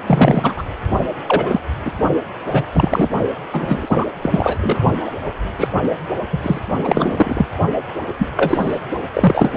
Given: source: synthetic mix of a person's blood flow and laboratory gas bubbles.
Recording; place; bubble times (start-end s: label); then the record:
Doppler ultrasound of blood flow; precordium
0.06-0.53 s: bubbles
0.55-0.62 s: bubbles
1.28-1.60 s: bubbles
1.85-1.91 s: bubbles
2.52-2.62 s: bubbles
2.73-3.08 s: bubbles
3.52-4.07 s: bubbles
4.22-4.58 s: bubbles
4.62-4.79 s: bubbles
5.05-5.12 s: bubbles
5.58-5.68 s: bubbles
5.83-5.89 s: bubbles
6.32-6.38 s: bubbles
6.42-6.59 s: bubbles
6.82-7.46 s: bubbles
8.18-8.28 s: bubbles
8.37-8.80 s: bubbles
9.13-9.57 s: bubbles
From the record:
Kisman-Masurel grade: 243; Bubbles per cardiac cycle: several, 3 to 8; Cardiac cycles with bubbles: 100%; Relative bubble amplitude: loud (0.450 to 0.775); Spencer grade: 3 (all of the cardiac periods contain showers or single bubble signals, but not dominating or overriding the cardiac motion signals); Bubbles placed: only in the low amplitude regions of the cardiac cycle